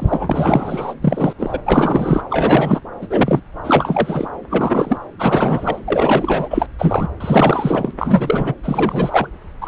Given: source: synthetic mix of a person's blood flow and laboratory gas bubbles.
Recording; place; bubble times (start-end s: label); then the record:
Doppler ultrasound of blood flow; subclavian vein
0.00-0.94 s: bubbles
1.01-1.33 s: bubbles
1.38-1.59 s: bubbles
1.66-2.23 s: bubbles
2.30-2.81 s: bubbles
3.01-3.40 s: bubbles
3.64-4.28 s: bubbles
4.50-4.99 s: bubbles
5.18-5.79 s: bubbles
5.88-6.66 s: bubbles
6.79-7.08 s: bubbles
7.20-7.91 s: bubbles
7.98-8.55 s: bubbles
8.63-9.28 s: bubbles
9.61-9.68 s: bubbles
From the record:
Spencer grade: 3 (all of the cardiac periods contain showers or single bubble signals, but not dominating or overriding the cardiac motion signals); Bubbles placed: anywhere in the cardiac cycle